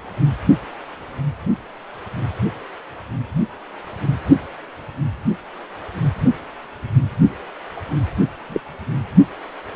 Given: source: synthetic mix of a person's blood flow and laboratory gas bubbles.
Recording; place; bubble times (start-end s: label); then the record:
Doppler ultrasound of blood flow; precordium
8.49-8.61 s: bubbles
From the record:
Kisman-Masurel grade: 112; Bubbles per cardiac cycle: 1 to 2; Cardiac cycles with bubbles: 1 to 10%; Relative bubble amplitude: moderate (0.250 to 0.450); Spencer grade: 1 (occasional bubble signal discernible with the cardiac motion signal, with majority of cardiac periods free of bubbles); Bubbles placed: only in the low amplitude regions of the cardiac cycle